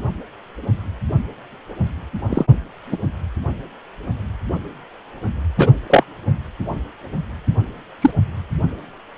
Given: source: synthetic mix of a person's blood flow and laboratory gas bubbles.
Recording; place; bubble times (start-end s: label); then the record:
Doppler ultrasound of blood flow; precordium
2.29-2.45 s: bubbles
2.92-2.97 s: bubbles
5.58-5.71 s: bubbles
5.90-6.04 s: bubbles
8.02-8.11 s: bubbles
From the record:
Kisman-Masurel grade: 123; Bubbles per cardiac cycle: 1 to 2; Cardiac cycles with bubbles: 10 to 50%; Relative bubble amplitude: loud (0.450 to 0.775); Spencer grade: 2 (many but less than half of the cardiac periods contain bubble signals, singularly or in groups); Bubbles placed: anywhere in the cardiac cycle